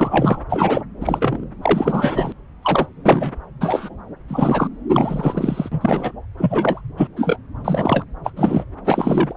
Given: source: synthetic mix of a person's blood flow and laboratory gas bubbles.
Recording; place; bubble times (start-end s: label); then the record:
Doppler ultrasound of blood flow; subclavian vein
0.00-0.41 s: bubbles
0.49-0.83 s: bubbles
1.01-1.45 s: bubbles
1.62-2.33 s: bubbles
2.62-2.88 s: bubbles
3.06-3.31 s: bubbles
3.61-3.89 s: bubbles
4.29-4.67 s: bubbles
4.90-5.69 s: bubbles
5.71-6.13 s: bubbles
6.38-6.81 s: bubbles
6.97-7.08 s: bubbles
7.16-7.39 s: bubbles
7.65-8.05 s: bubbles
8.24-8.31 s: bubbles
8.36-8.64 s: bubbles
8.84-9.33 s: bubbles
From the record:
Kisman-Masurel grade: 243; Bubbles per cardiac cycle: several, 3 to 8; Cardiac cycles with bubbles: 100%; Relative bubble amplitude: loud (0.450 to 0.775); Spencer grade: 3 (all of the cardiac periods contain showers or single bubble signals, but not dominating or overriding the cardiac motion signals); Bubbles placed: anywhere in the cardiac cycle